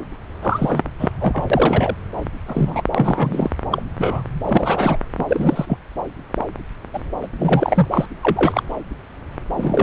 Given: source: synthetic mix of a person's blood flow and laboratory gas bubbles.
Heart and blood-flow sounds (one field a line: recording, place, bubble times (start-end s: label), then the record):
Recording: Doppler ultrasound of blood flow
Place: subclavian vein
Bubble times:
0.42-0.85 s: bubbles
0.99-1.09 s: bubbles
1.20-1.45 s: bubbles
1.50-1.95 s: bubbles
2.46-2.84 s: bubbles
2.94-3.50 s: bubbles
3.71-3.83 s: bubbles
3.97-4.22 s: bubbles
4.43-4.97 s: bubbles
5.18-5.25 s: bubbles
5.28-5.78 s: bubbles
6.93-7.02 s: bubbles
7.22-7.27 s: bubbles
7.38-7.85 s: bubbles
7.91-8.06 s: bubbles
8.23-8.63 s: bubbles
9.56-9.83 s: bubbles
From the record:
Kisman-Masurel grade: 233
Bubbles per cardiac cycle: several, 3 to 8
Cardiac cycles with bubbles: 50 to 99%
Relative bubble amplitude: loud (0.450 to 0.775)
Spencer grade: 3 (all of the cardiac periods contain showers or single bubble signals, but not dominating or overriding the cardiac motion signals)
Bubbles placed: anywhere in the cardiac cycle